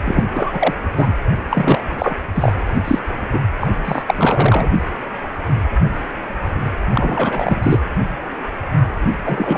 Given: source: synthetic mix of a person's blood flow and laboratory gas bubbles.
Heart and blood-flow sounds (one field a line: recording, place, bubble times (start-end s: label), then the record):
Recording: Doppler ultrasound of blood flow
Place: precordium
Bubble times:
0.04-0.23 s: bubbles
0.31-0.74 s: bubbles
0.96-1.13 s: bubbles
1.50-2.17 s: bubbles
2.34-2.52 s: bubbles
2.84-2.99 s: bubbles
3.32-3.40 s: bubbles
3.60-3.67 s: bubbles
3.84-4.02 s: bubbles
4.07-4.70 s: bubbles
6.93-7.81 s: bubbles
9.24-9.58 s: bubbles
From the record:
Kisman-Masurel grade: 333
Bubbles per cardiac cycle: rolling drumbeat, 9 or more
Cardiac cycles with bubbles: 50 to 99%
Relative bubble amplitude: loud (0.450 to 0.775)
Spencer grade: 3 (all of the cardiac periods contain showers or single bubble signals, but not dominating or overriding the cardiac motion signals)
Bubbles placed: anywhere in the cardiac cycle